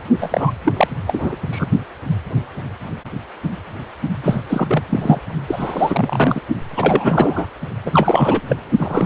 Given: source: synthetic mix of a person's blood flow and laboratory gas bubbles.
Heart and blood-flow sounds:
Doppler ultrasound of blood flow; precordium
0.21-0.51 s: bubbles
0.64-0.73 s: bubbles
0.77-0.88 s: bubbles
1.07-1.36 s: bubbles
1.51-1.68 s: bubbles
4.23-4.42 s: bubbles
4.49-4.86 s: bubbles
4.89-5.20 s: bubbles
5.47-6.42 s: bubbles
6.76-7.47 s: bubbles
7.85-8.41 s: bubbles
8.49-8.57 s: bubbles
8.77-9.06 s: bubbles
From the record:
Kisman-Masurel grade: 333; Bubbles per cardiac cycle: rolling drumbeat, 9 or more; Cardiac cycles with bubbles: 50 to 99%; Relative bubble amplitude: loud (0.450 to 0.775); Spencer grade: 3 (all of the cardiac periods contain showers or single bubble signals, but not dominating or overriding the cardiac motion signals); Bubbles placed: only in the low amplitude regions of the cardiac cycle

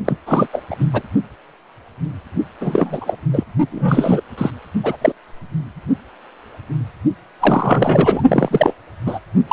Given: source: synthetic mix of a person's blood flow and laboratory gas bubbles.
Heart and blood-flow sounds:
Doppler ultrasound of blood flow; precordium
0.05-0.17 s: bubbles
0.26-0.47 s: bubbles
0.53-0.62 s: bubbles
0.70-0.76 s: bubbles
0.79-0.88 s: bubbles
0.93-1.03 s: bubbles
2.60-3.16 s: bubbles
3.33-3.44 s: bubbles
3.71-4.21 s: bubbles
4.38-4.50 s: bubbles
4.83-4.96 s: bubbles
5.01-5.12 s: bubbles
7.40-8.22 s: bubbles
8.27-8.73 s: bubbles
9.05-9.19 s: bubbles
9.47-9.53 s: bubbles
From the record:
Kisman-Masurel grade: 333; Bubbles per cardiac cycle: rolling drumbeat, 9 or more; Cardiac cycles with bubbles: 50 to 99%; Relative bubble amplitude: loud (0.450 to 0.775); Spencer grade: 3 (all of the cardiac periods contain showers or single bubble signals, but not dominating or overriding the cardiac motion signals); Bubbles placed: only in the low amplitude regions of the cardiac cycle

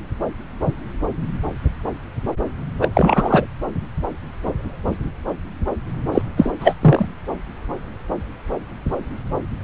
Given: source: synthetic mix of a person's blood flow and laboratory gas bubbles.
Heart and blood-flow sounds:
Doppler ultrasound of blood flow; subclavian vein
2.81-2.88 s: bubbles
2.93-3.46 s: bubbles
6.12-6.21 s: bubbles
6.37-6.53 s: bubbles
6.60-6.74 s: bubbles
6.82-7.05 s: bubbles
From the record:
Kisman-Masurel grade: 223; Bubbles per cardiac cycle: several, 3 to 8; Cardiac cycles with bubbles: 10 to 50%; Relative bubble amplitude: loud (0.450 to 0.775); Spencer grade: 2 (many but less than half of the cardiac periods contain bubble signals, singularly or in groups); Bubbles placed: anywhere in the cardiac cycle

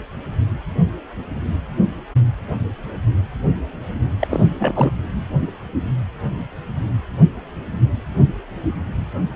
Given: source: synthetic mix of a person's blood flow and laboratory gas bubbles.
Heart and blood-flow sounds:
Doppler ultrasound of blood flow; precordium
4.20-4.51 s: bubbles
4.58-4.91 s: bubbles
From the record:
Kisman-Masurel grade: 222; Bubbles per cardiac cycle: several, 3 to 8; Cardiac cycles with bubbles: 10 to 50%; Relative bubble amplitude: moderate (0.250 to 0.450); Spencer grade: 2 (many but less than half of the cardiac periods contain bubble signals, singularly or in groups); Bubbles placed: anywhere in the cardiac cycle

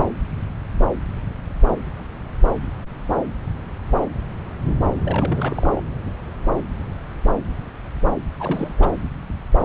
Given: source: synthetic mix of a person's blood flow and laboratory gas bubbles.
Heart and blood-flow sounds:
Doppler ultrasound of blood flow; subclavian vein
5.04-5.81 s: bubbles
8.39-8.75 s: bubbles
8.77-8.95 s: bubbles
From the record:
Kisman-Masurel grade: 221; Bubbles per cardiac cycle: several, 3 to 8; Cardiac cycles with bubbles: 10 to 50%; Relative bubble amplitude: barely perceptible (0.100 to 0.250); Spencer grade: 2 (many but less than half of the cardiac periods contain bubble signals, singularly or in groups); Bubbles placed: anywhere in the cardiac cycle

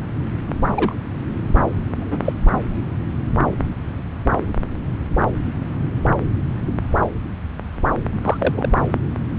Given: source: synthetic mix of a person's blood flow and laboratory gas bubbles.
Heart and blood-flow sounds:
Doppler ultrasound of blood flow; subclavian vein
0.70-0.95 s: bubbles
1.96-2.32 s: bubbles
8.23-8.69 s: bubbles
From the record:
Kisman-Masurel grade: 122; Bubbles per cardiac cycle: 1 to 2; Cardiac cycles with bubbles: 10 to 50%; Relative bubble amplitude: moderate (0.250 to 0.450); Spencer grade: 2 (many but less than half of the cardiac periods contain bubble signals, singularly or in groups); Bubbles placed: anywhere in the cardiac cycle

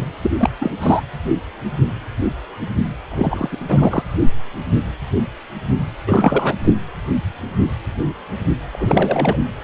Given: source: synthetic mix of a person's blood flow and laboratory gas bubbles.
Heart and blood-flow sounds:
Doppler ultrasound of blood flow; precordium
0.00-0.05 s: bubbles
0.21-0.31 s: bubbles
0.39-0.49 s: bubbles
0.61-0.71 s: bubbles
0.80-1.02 s: bubbles
3.10-3.57 s: bubbles
3.68-4.03 s: bubbles
6.07-6.55 s: bubbles
6.64-6.74 s: bubbles
8.70-9.39 s: bubbles
From the record:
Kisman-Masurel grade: 333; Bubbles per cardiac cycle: rolling drumbeat, 9 or more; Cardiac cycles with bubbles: 50 to 99%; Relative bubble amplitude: loud (0.450 to 0.775); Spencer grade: 3 (all of the cardiac periods contain showers or single bubble signals, but not dominating or overriding the cardiac motion signals); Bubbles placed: anywhere in the cardiac cycle

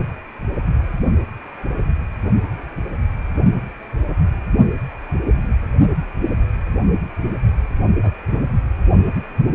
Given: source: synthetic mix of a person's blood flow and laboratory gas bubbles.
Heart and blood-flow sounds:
Doppler ultrasound of blood flow; precordium
8.03-8.12 s: bubbles
From the record:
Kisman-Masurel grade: 112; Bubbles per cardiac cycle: 1 to 2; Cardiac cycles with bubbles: 1 to 10%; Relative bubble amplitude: moderate (0.250 to 0.450); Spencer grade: 1 (occasional bubble signal discernible with the cardiac motion signal, with majority of cardiac periods free of bubbles); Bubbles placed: only in the low amplitude regions of the cardiac cycle

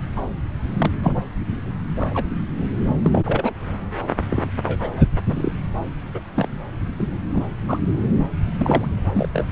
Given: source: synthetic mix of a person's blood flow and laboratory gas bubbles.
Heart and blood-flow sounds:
Doppler ultrasound of blood flow; subclavian vein
0.16-0.21 s: bubbles
0.77-0.91 s: bubbles
1.02-1.14 s: bubbles
1.96-2.25 s: bubbles
2.60-2.65 s: bubbles
3.04-3.54 s: bubbles
4.29-4.43 s: bubbles
4.65-5.07 s: bubbles
5.26-5.53 s: bubbles
6.14-6.20 s: bubbles
6.36-6.48 s: bubbles
6.98-7.15 s: bubbles
7.34-7.43 s: bubbles
7.68-7.79 s: bubbles
8.58-8.87 s: bubbles
9.14-9.28 s: bubbles
9.33-9.47 s: bubbles
From the record:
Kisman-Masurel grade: 242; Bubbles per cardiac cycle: several, 3 to 8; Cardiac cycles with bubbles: 100%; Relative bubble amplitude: moderate (0.250 to 0.450); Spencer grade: 3 (all of the cardiac periods contain showers or single bubble signals, but not dominating or overriding the cardiac motion signals); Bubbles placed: anywhere in the cardiac cycle

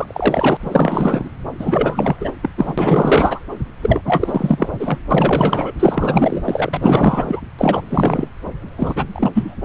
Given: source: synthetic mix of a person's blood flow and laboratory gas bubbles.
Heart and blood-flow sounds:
Doppler ultrasound of blood flow; subclavian vein
0.00-0.57 s: bubbles
0.59-1.30 s: bubbles
1.58-2.31 s: bubbles
2.42-2.50 s: bubbles
2.57-2.74 s: bubbles
2.78-3.39 s: bubbles
3.82-4.01 s: bubbles
4.05-4.69 s: bubbles
4.79-4.98 s: bubbles
5.10-5.72 s: bubbles
5.79-7.42 s: bubbles
7.58-8.27 s: bubbles
8.77-9.65 s: bubbles
From the record:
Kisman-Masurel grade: 444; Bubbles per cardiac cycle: continuous sound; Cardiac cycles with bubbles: 100%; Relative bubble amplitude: maximal (0.775 to 0.999); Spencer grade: 4 (maximum detectable bubble signal sounding continuously throughout systole and diastole of every cardiac period, and overriding the amplitude of the normal cardiac signals); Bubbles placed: anywhere in the cardiac cycle

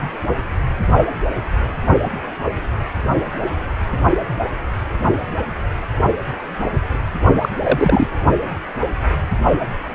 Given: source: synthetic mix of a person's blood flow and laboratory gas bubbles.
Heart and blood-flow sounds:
Doppler ultrasound of blood flow; precordium
7.41-7.49 s: bubbles
7.63-8.07 s: bubbles
From the record:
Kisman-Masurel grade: 213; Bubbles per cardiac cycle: several, 3 to 8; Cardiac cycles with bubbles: 1 to 10%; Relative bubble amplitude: loud (0.450 to 0.775); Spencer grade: 1 (occasional bubble signal discernible with the cardiac motion signal, with majority of cardiac periods free of bubbles); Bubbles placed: only in the low amplitude regions of the cardiac cycle

